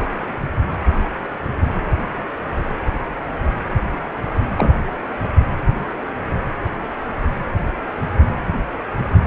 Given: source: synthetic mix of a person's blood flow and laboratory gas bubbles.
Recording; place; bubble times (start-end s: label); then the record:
Doppler ultrasound of blood flow; precordium
4.58-4.76 s: bubbles
From the record:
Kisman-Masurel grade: 113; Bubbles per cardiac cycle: 1 to 2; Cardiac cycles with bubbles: 1 to 10%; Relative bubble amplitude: loud (0.450 to 0.775); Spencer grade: 1 (occasional bubble signal discernible with the cardiac motion signal, with majority of cardiac periods free of bubbles); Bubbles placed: anywhere in the cardiac cycle